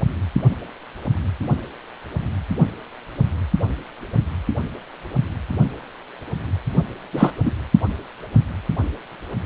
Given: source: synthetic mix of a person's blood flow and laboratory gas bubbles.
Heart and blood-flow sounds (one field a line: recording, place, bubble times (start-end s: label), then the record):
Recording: Doppler ultrasound of blood flow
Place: precordium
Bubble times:
7.13-7.32 s: bubbles
7.45-7.50 s: bubbles
From the record:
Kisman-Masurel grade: 213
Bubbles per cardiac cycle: several, 3 to 8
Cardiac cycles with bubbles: 1 to 10%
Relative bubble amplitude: loud (0.450 to 0.775)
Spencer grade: 1 (occasional bubble signal discernible with the cardiac motion signal, with majority of cardiac periods free of bubbles)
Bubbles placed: only in the low amplitude regions of the cardiac cycle